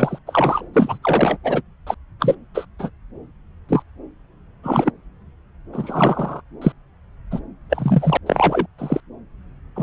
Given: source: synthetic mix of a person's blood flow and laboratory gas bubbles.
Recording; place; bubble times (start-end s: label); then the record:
Doppler ultrasound of blood flow; subclavian vein
0.00-0.19 s: bubbles
0.27-0.65 s: bubbles
0.73-0.98 s: bubbles
1.02-1.37 s: bubbles
1.44-1.61 s: bubbles
1.86-1.95 s: bubbles
2.19-2.35 s: bubbles
2.54-2.65 s: bubbles
2.79-2.90 s: bubbles
3.69-3.83 s: bubbles
4.63-4.91 s: bubbles
5.72-6.42 s: bubbles
6.61-6.72 s: bubbles
7.31-7.39 s: bubbles
7.70-8.17 s: bubbles
8.26-8.67 s: bubbles
8.78-9.01 s: bubbles
9.76-9.83 s: bubbles
From the record:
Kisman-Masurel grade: 243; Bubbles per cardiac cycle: several, 3 to 8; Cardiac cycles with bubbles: 100%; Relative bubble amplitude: loud (0.450 to 0.775); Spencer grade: 3 (all of the cardiac periods contain showers or single bubble signals, but not dominating or overriding the cardiac motion signals); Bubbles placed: anywhere in the cardiac cycle